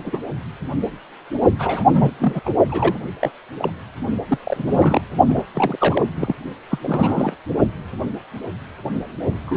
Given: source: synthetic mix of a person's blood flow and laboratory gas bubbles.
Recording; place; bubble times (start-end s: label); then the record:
Doppler ultrasound of blood flow; precordium
0.00-0.19 s: bubbles
1.58-2.15 s: bubbles
2.20-2.41 s: bubbles
2.45-2.49 s: bubbles
2.69-2.99 s: bubbles
3.20-3.31 s: bubbles
3.58-3.70 s: bubbles
4.27-4.38 s: bubbles
4.45-5.04 s: bubbles
5.28-5.44 s: bubbles
5.54-6.05 s: bubbles
6.14-6.35 s: bubbles
6.69-6.78 s: bubbles
6.83-7.35 s: bubbles
9.45-9.57 s: bubbles
From the record:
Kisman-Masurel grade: 332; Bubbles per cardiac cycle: rolling drumbeat, 9 or more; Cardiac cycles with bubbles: 50 to 99%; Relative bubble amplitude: moderate (0.250 to 0.450); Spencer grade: 3 (all of the cardiac periods contain showers or single bubble signals, but not dominating or overriding the cardiac motion signals); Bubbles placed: only in the low amplitude regions of the cardiac cycle